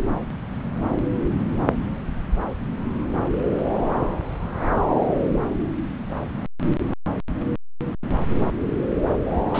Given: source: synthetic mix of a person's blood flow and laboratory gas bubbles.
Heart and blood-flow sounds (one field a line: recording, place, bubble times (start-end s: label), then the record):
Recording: Doppler ultrasound of blood flow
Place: subclavian vein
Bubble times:
9.54-9.59 s: bubbles
From the record:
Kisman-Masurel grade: 113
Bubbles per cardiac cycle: 1 to 2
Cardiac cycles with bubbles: 1 to 10%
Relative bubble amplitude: loud (0.450 to 0.775)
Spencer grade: 1 (occasional bubble signal discernible with the cardiac motion signal, with majority of cardiac periods free of bubbles)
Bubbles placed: anywhere in the cardiac cycle